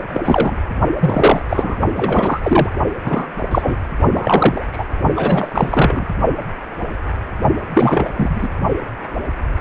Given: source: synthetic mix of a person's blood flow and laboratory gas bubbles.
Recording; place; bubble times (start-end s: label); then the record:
Doppler ultrasound of blood flow; precordium
0.13-0.20 s: bubbles
0.24-0.57 s: bubbles
0.99-1.42 s: bubbles
1.49-1.77 s: bubbles
1.95-2.40 s: bubbles
2.42-2.70 s: bubbles
3.05-3.27 s: bubbles
3.51-3.77 s: bubbles
4.13-4.65 s: bubbles
4.73-4.86 s: bubbles
5.16-6.14 s: bubbles
7.74-8.48 s: bubbles
From the record:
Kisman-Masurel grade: 233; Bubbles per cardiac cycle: several, 3 to 8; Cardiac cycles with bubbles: 50 to 99%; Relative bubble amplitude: loud (0.450 to 0.775); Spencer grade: 3 (all of the cardiac periods contain showers or single bubble signals, but not dominating or overriding the cardiac motion signals); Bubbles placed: only in the low amplitude regions of the cardiac cycle